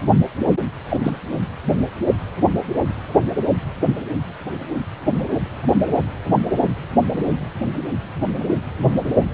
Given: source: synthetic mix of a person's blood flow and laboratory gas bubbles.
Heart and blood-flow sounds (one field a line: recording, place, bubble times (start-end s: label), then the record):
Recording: Doppler ultrasound of blood flow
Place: precordium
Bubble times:
0.89-0.97 s: bubbles
1.01-1.20 s: bubbles
From the record:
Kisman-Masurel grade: 212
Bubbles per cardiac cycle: several, 3 to 8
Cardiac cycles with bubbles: 1 to 10%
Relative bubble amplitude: moderate (0.250 to 0.450)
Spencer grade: 1 (occasional bubble signal discernible with the cardiac motion signal, with majority of cardiac periods free of bubbles)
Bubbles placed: anywhere in the cardiac cycle